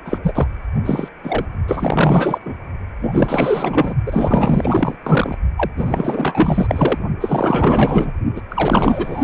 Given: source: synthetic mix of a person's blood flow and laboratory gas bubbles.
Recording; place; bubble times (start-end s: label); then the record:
Doppler ultrasound of blood flow; precordium
0.05-0.19 s: bubbles
0.23-0.33 s: bubbles
0.35-0.48 s: bubbles
0.85-1.08 s: bubbles
1.23-1.46 s: bubbles
1.68-2.38 s: bubbles
2.45-2.54 s: bubbles
3.01-3.94 s: bubbles
4.05-4.96 s: bubbles
5.03-5.38 s: bubbles
5.56-5.71 s: bubbles
5.76-6.98 s: bubbles
7.21-8.11 s: bubbles
8.36-8.42 s: bubbles
8.50-9.23 s: bubbles
From the record:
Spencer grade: 4 (maximum detectable bubble signal sounding continuously throughout systole and diastole of every cardiac period, and overriding the amplitude of the normal cardiac signals); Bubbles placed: only in the low amplitude regions of the cardiac cycle